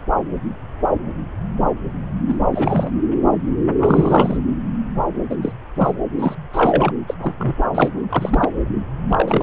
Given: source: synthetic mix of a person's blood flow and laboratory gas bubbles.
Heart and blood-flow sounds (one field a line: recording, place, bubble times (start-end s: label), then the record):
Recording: Doppler ultrasound of blood flow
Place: subclavian vein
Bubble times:
2.28-2.37 s: bubbles
2.52-2.90 s: bubbles
3.79-4.37 s: bubbles
5.29-5.36 s: bubbles
5.42-5.53 s: bubbles
5.75-5.95 s: bubbles
6.19-6.35 s: bubbles
6.53-6.92 s: bubbles
7.07-7.15 s: bubbles
7.22-7.33 s: bubbles
7.38-7.54 s: bubbles
7.75-7.92 s: bubbles
8.09-8.50 s: bubbles
9.09-9.43 s: bubbles
From the record:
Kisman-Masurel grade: 232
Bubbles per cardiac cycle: several, 3 to 8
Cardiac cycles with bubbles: 50 to 99%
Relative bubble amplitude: moderate (0.250 to 0.450)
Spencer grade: 3 (all of the cardiac periods contain showers or single bubble signals, but not dominating or overriding the cardiac motion signals)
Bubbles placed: anywhere in the cardiac cycle